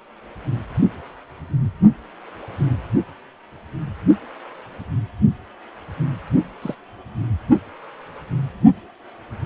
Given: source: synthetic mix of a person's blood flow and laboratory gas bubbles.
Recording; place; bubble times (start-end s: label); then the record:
Doppler ultrasound of blood flow; precordium
6.62-6.75 s: bubbles
From the record:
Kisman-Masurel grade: 121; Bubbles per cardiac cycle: 1 to 2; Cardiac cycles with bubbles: 10 to 50%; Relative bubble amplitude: barely perceptible (0.100 to 0.250); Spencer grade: 2 (many but less than half of the cardiac periods contain bubble signals, singularly or in groups); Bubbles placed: only in the low amplitude regions of the cardiac cycle